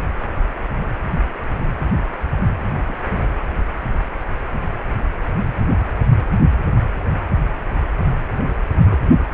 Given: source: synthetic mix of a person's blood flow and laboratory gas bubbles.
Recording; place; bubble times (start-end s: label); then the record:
Doppler ultrasound of blood flow; precordium
2.88-2.95 s: bubbles
8.85-8.99 s: bubbles
From the record:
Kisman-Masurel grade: 121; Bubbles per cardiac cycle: 1 to 2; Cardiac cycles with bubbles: 10 to 50%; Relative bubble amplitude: barely perceptible (0.100 to 0.250); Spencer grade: 2 (many but less than half of the cardiac periods contain bubble signals, singularly or in groups); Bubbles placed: only in the low amplitude regions of the cardiac cycle